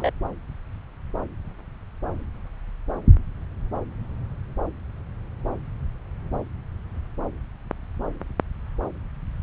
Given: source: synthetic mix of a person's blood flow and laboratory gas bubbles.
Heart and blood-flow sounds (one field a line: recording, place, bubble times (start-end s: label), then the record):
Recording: Doppler ultrasound of blood flow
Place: subclavian vein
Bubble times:
0.00-0.10 s: bubbles
From the record:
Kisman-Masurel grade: 212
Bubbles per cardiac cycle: several, 3 to 8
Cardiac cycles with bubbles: 1 to 10%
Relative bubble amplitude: moderate (0.250 to 0.450)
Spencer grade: 1 (occasional bubble signal discernible with the cardiac motion signal, with majority of cardiac periods free of bubbles)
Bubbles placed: anywhere in the cardiac cycle